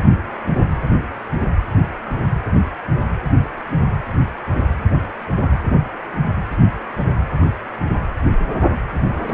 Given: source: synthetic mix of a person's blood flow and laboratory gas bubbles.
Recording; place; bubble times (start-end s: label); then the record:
Doppler ultrasound of blood flow; precordium
9.25-9.34 s: bubbles
From the record:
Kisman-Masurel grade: 111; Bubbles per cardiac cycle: 1 to 2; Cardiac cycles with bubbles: 1 to 10%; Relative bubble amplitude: barely perceptible (0.100 to 0.250); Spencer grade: 1 (occasional bubble signal discernible with the cardiac motion signal, with majority of cardiac periods free of bubbles); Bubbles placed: anywhere in the cardiac cycle